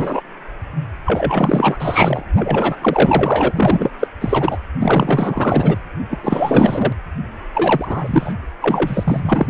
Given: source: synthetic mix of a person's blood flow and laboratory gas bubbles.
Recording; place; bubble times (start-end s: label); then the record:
Doppler ultrasound of blood flow; precordium
0.00-0.21 s: bubbles
1.05-2.25 s: bubbles
2.37-2.76 s: bubbles
2.81-3.52 s: bubbles
3.55-3.91 s: bubbles
4.00-4.07 s: bubbles
4.21-4.57 s: bubbles
4.79-5.78 s: bubbles
6.10-6.18 s: bubbles
6.22-6.92 s: bubbles
7.54-8.33 s: bubbles
8.61-9.47 s: bubbles
From the record:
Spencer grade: 4 (maximum detectable bubble signal sounding continuously throughout systole and diastole of every cardiac period, and overriding the amplitude of the normal cardiac signals); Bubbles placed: anywhere in the cardiac cycle